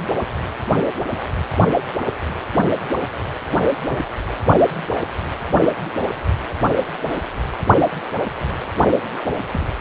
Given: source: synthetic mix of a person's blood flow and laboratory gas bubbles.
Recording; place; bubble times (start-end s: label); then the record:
Doppler ultrasound of blood flow; precordium
3.88-3.98 s: bubbles
9.29-9.34 s: bubbles
9.52-9.67 s: bubbles
From the record:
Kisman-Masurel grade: 121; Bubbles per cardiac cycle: 1 to 2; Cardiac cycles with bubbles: 10 to 50%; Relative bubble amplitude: barely perceptible (0.100 to 0.250); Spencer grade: 2 (many but less than half of the cardiac periods contain bubble signals, singularly or in groups); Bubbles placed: only in the low amplitude regions of the cardiac cycle